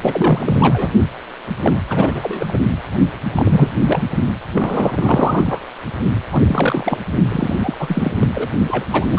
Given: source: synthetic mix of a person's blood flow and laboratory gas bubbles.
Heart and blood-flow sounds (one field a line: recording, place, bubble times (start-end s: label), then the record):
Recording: Doppler ultrasound of blood flow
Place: precordium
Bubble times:
0.02-0.93 s: bubbles
1.63-1.74 s: bubbles
1.90-2.58 s: bubbles
3.36-3.75 s: bubbles
3.87-4.01 s: bubbles
4.54-5.61 s: bubbles
6.31-6.44 s: bubbles
6.46-6.98 s: bubbles
7.29-7.56 s: bubbles
7.59-7.74 s: bubbles
7.79-8.10 s: bubbles
8.21-8.27 s: bubbles
8.34-8.48 s: bubbles
8.67-8.85 s: bubbles
8.91-9.07 s: bubbles
9.11-9.19 s: bubbles
From the record:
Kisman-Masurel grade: 342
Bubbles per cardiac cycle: rolling drumbeat, 9 or more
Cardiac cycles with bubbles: 100%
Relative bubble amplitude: moderate (0.250 to 0.450)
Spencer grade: 3 (all of the cardiac periods contain showers or single bubble signals, but not dominating or overriding the cardiac motion signals)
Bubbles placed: only in the low amplitude regions of the cardiac cycle